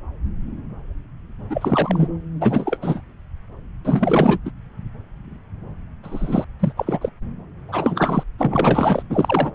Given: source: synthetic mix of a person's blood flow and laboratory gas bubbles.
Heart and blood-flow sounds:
Doppler ultrasound of blood flow; subclavian vein
1.50-2.08 s: bubbles
2.41-2.77 s: bubbles
2.82-3.00 s: bubbles
3.85-4.38 s: bubbles
4.45-4.50 s: bubbles
6.03-6.44 s: bubbles
6.59-6.72 s: bubbles
6.76-7.09 s: bubbles
7.68-8.24 s: bubbles
8.38-9.03 s: bubbles
9.10-9.51 s: bubbles
From the record:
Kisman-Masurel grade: 332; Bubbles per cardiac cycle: rolling drumbeat, 9 or more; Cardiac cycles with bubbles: 50 to 99%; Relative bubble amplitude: moderate (0.250 to 0.450); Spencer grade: 3 (all of the cardiac periods contain showers or single bubble signals, but not dominating or overriding the cardiac motion signals); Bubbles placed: anywhere in the cardiac cycle

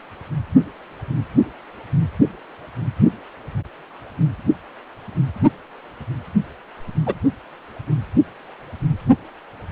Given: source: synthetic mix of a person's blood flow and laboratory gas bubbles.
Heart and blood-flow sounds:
Doppler ultrasound of blood flow; precordium
7.06-7.15 s: bubbles
From the record:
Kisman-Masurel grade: 113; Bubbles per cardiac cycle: 1 to 2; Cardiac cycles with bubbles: 1 to 10%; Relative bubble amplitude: loud (0.450 to 0.775); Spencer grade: 1 (occasional bubble signal discernible with the cardiac motion signal, with majority of cardiac periods free of bubbles); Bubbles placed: only in the low amplitude regions of the cardiac cycle

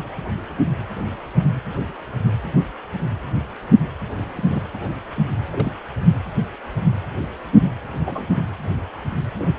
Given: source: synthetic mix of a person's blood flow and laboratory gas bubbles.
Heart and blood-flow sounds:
Doppler ultrasound of blood flow; precordium
4.33-4.69 s: bubbles
5.51-5.74 s: bubbles
8.05-8.26 s: bubbles
9.38-9.50 s: bubbles
From the record:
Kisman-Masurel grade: 121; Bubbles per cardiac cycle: 1 to 2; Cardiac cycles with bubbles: 10 to 50%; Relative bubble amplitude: barely perceptible (0.100 to 0.250); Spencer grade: 2 (many but less than half of the cardiac periods contain bubble signals, singularly or in groups); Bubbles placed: anywhere in the cardiac cycle

